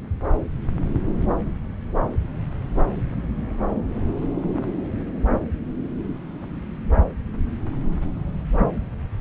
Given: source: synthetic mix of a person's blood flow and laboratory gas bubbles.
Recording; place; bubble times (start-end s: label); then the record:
Doppler ultrasound of blood flow; subclavian vein
no bubbles
From the record:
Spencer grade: 0 (complete lack of bubble signals)